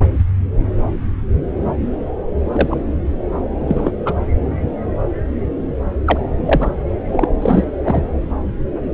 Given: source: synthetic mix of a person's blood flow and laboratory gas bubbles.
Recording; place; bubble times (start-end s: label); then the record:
Doppler ultrasound of blood flow; subclavian vein
2.51-2.80 s: bubbles
3.68-3.93 s: bubbles
4.05-4.13 s: bubbles
6.06-6.18 s: bubbles
6.46-6.72 s: bubbles
7.07-7.26 s: bubbles
7.41-7.64 s: bubbles
7.83-8.03 s: bubbles
From the record:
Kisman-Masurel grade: 123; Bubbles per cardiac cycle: 1 to 2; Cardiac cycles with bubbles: 10 to 50%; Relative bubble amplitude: loud (0.450 to 0.775); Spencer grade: 2 (many but less than half of the cardiac periods contain bubble signals, singularly or in groups); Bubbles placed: anywhere in the cardiac cycle